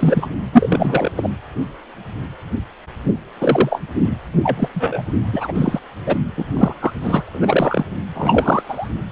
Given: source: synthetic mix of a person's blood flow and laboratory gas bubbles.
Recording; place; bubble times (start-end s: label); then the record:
Doppler ultrasound of blood flow; precordium
0.00-0.26 s: bubbles
0.52-1.11 s: bubbles
1.16-1.29 s: bubbles
3.40-3.81 s: bubbles
4.43-4.69 s: bubbles
4.74-5.03 s: bubbles
5.33-5.79 s: bubbles
6.05-6.17 s: bubbles
6.37-6.46 s: bubbles
6.57-6.74 s: bubbles
6.80-6.92 s: bubbles
7.01-7.23 s: bubbles
7.28-7.86 s: bubbles
8.14-8.88 s: bubbles
From the record:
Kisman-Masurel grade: 233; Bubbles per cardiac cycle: several, 3 to 8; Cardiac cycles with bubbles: 50 to 99%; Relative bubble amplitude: loud (0.450 to 0.775); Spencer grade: 3 (all of the cardiac periods contain showers or single bubble signals, but not dominating or overriding the cardiac motion signals); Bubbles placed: anywhere in the cardiac cycle